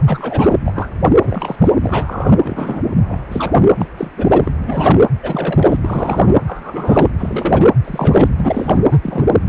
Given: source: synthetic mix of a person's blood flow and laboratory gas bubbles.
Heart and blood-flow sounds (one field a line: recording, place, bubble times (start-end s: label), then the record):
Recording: Doppler ultrasound of blood flow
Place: precordium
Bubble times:
0.07-0.57 s: bubbles
0.65-0.90 s: bubbles
1.05-1.11 s: bubbles
1.23-1.71 s: bubbles
1.83-2.37 s: bubbles
2.43-2.96 s: bubbles
3.08-3.20 s: bubbles
3.31-3.54 s: bubbles
3.78-3.87 s: bubbles
3.97-4.11 s: bubbles
4.16-4.51 s: bubbles
4.64-5.05 s: bubbles
5.21-5.76 s: bubbles
5.80-6.37 s: bubbles
6.47-7.08 s: bubbles
7.18-7.65 s: bubbles
7.84-8.28 s: bubbles
8.36-8.79 s: bubbles
8.90-8.98 s: bubbles
9.03-9.25 s: bubbles
From the record:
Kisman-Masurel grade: 233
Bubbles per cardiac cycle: several, 3 to 8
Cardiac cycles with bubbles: 50 to 99%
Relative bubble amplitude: loud (0.450 to 0.775)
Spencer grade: 3 (all of the cardiac periods contain showers or single bubble signals, but not dominating or overriding the cardiac motion signals)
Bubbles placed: anywhere in the cardiac cycle